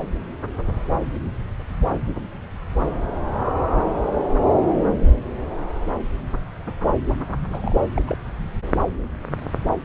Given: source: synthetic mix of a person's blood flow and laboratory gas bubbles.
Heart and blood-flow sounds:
Doppler ultrasound of blood flow; subclavian vein
7.50-7.76 s: bubbles
7.96-8.02 s: bubbles
8.08-8.16 s: bubbles
8.78-8.81 s: bubbles
From the record:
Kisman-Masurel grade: 221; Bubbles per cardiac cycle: several, 3 to 8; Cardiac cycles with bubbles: 10 to 50%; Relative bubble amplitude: barely perceptible (0.100 to 0.250); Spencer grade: 2 (many but less than half of the cardiac periods contain bubble signals, singularly or in groups); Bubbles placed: anywhere in the cardiac cycle

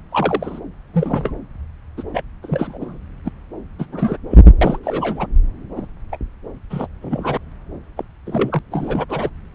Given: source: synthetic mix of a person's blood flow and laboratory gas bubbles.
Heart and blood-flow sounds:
Doppler ultrasound of blood flow; subclavian vein
0.12-0.60 s: bubbles
0.93-1.31 s: bubbles
1.97-2.03 s: bubbles
2.13-2.22 s: bubbles
2.42-2.78 s: bubbles
2.81-2.98 s: bubbles
3.25-3.31 s: bubbles
3.79-3.85 s: bubbles
3.92-4.17 s: bubbles
4.30-4.38 s: bubbles
4.61-4.78 s: bubbles
4.83-5.26 s: bubbles
5.76-5.87 s: bubbles
6.11-6.17 s: bubbles
6.70-6.87 s: bubbles
7.02-7.38 s: bubbles
7.96-8.04 s: bubbles
8.26-8.59 s: bubbles
8.71-9.06 s: bubbles
9.09-9.30 s: bubbles
From the record:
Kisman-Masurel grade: 242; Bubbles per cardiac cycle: several, 3 to 8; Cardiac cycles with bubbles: 100%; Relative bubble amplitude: moderate (0.250 to 0.450); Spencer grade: 3 (all of the cardiac periods contain showers or single bubble signals, but not dominating or overriding the cardiac motion signals); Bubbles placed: anywhere in the cardiac cycle

